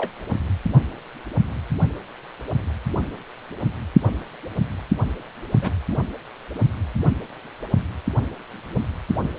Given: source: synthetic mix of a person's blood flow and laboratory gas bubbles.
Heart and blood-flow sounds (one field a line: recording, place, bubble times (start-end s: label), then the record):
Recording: Doppler ultrasound of blood flow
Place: precordium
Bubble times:
0.00-0.11 s: bubbles
5.62-5.71 s: bubbles
5.91-5.96 s: bubbles
9.19-9.30 s: bubbles
From the record:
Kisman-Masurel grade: 121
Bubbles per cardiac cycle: 1 to 2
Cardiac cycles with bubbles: 10 to 50%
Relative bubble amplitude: barely perceptible (0.100 to 0.250)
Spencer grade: 2 (many but less than half of the cardiac periods contain bubble signals, singularly or in groups)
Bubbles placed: anywhere in the cardiac cycle